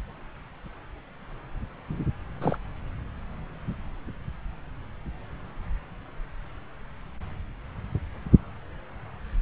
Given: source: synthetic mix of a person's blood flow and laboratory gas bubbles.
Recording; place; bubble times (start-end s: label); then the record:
Doppler ultrasound of blood flow; subclavian vein
2.41-2.58 s: bubbles
From the record:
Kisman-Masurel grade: 111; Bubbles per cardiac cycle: 1 to 2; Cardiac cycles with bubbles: 1 to 10%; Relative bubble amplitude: barely perceptible (0.100 to 0.250); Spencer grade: 1 (occasional bubble signal discernible with the cardiac motion signal, with majority of cardiac periods free of bubbles); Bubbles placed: anywhere in the cardiac cycle